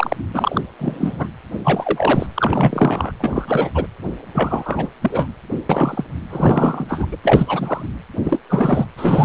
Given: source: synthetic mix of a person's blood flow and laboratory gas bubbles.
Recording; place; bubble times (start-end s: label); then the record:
Doppler ultrasound of blood flow; precordium
0.00-0.17 s: bubbles
0.34-0.61 s: bubbles
0.78-1.27 s: bubbles
1.65-2.27 s: bubbles
2.34-3.12 s: bubbles
3.19-3.70 s: bubbles
3.74-3.86 s: bubbles
4.35-4.89 s: bubbles
5.01-5.29 s: bubbles
5.69-6.04 s: bubbles
6.30-7.06 s: bubbles
7.12-7.16 s: bubbles
7.23-7.86 s: bubbles
8.24-8.40 s: bubbles
8.48-8.87 s: bubbles
8.97-9.25 s: bubbles
From the record:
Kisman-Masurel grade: 333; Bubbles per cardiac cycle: rolling drumbeat, 9 or more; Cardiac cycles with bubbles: 50 to 99%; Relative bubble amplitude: loud (0.450 to 0.775); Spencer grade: 3 (all of the cardiac periods contain showers or single bubble signals, but not dominating or overriding the cardiac motion signals); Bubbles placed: anywhere in the cardiac cycle